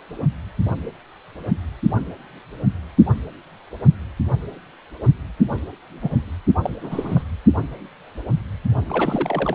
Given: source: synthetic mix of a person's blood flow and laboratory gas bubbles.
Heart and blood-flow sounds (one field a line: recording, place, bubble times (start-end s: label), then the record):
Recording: Doppler ultrasound of blood flow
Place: precordium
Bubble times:
6.02-6.10 s: bubbles
6.63-6.75 s: bubbles
6.83-7.23 s: bubbles
8.89-9.55 s: bubbles
From the record:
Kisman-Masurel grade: 222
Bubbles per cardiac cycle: several, 3 to 8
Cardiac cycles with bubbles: 10 to 50%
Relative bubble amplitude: moderate (0.250 to 0.450)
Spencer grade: 2 (many but less than half of the cardiac periods contain bubble signals, singularly or in groups)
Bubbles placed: only in the low amplitude regions of the cardiac cycle